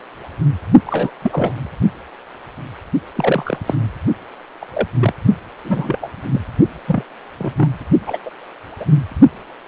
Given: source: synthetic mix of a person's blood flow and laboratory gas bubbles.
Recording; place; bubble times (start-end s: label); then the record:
Doppler ultrasound of blood flow; precordium
0.86-1.10 s: bubbles
1.22-1.71 s: bubbles
3.15-3.58 s: bubbles
3.67-3.75 s: bubbles
4.62-4.67 s: bubbles
4.73-4.88 s: bubbles
5.01-5.13 s: bubbles
5.64-6.10 s: bubbles
6.32-6.40 s: bubbles
6.87-7.04 s: bubbles
7.38-7.54 s: bubbles
7.56-7.69 s: bubbles
8.06-8.18 s: bubbles
8.25-8.30 s: bubbles
8.79-8.86 s: bubbles
From the record:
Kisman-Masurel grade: 232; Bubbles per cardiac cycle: several, 3 to 8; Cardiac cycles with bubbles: 50 to 99%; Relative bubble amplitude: moderate (0.250 to 0.450); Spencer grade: 3 (all of the cardiac periods contain showers or single bubble signals, but not dominating or overriding the cardiac motion signals); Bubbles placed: only in the low amplitude regions of the cardiac cycle